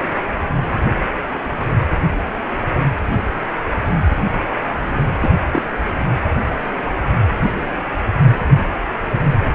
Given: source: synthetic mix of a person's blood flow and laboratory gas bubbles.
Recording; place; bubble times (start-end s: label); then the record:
Doppler ultrasound of blood flow; precordium
5.21-5.30 s: bubbles
5.52-5.62 s: bubbles
From the record:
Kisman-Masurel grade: 112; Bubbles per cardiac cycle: 1 to 2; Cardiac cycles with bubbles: 1 to 10%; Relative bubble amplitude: moderate (0.250 to 0.450); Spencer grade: 1 (occasional bubble signal discernible with the cardiac motion signal, with majority of cardiac periods free of bubbles); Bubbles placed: anywhere in the cardiac cycle